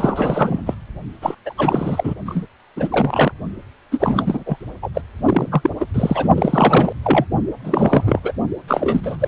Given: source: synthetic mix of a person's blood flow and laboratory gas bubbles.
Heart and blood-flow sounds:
Doppler ultrasound of blood flow; precordium
0.00-0.74 s: bubbles
1.21-1.35 s: bubbles
1.46-1.54 s: bubbles
1.58-2.14 s: bubbles
2.25-2.46 s: bubbles
2.76-2.88 s: bubbles
2.91-3.32 s: bubbles
3.92-4.43 s: bubbles
4.46-4.56 s: bubbles
4.82-4.89 s: bubbles
4.94-5.01 s: bubbles
5.25-5.70 s: bubbles
5.80-5.86 s: bubbles
5.94-6.29 s: bubbles
6.34-6.92 s: bubbles
7.04-7.25 s: bubbles
7.64-8.20 s: bubbles
8.23-8.33 s: bubbles
8.68-9.17 s: bubbles
9.20-9.28 s: bubbles
From the record:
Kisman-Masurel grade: 343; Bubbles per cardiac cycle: rolling drumbeat, 9 or more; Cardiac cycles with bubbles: 100%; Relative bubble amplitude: loud (0.450 to 0.775); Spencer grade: 3 (all of the cardiac periods contain showers or single bubble signals, but not dominating or overriding the cardiac motion signals); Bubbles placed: only in the low amplitude regions of the cardiac cycle

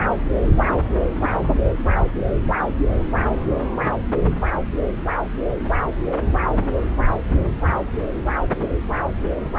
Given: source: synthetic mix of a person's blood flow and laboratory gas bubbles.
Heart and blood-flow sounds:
Doppler ultrasound of blood flow; subclavian vein
1.21-1.29 s: bubbles
From the record:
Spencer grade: 1 (occasional bubble signal discernible with the cardiac motion signal, with majority of cardiac periods free of bubbles); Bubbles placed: anywhere in the cardiac cycle

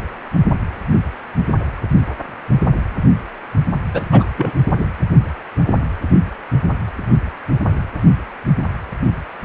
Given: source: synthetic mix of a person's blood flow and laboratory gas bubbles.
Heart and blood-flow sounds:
Doppler ultrasound of blood flow; precordium
3.93-4.01 s: bubbles
4.12-4.28 s: bubbles
4.37-4.53 s: bubbles
4.78-4.86 s: bubbles
From the record:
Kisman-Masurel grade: 213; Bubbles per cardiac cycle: several, 3 to 8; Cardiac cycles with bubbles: 1 to 10%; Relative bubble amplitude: loud (0.450 to 0.775); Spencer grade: 1 (occasional bubble signal discernible with the cardiac motion signal, with majority of cardiac periods free of bubbles); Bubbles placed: anywhere in the cardiac cycle

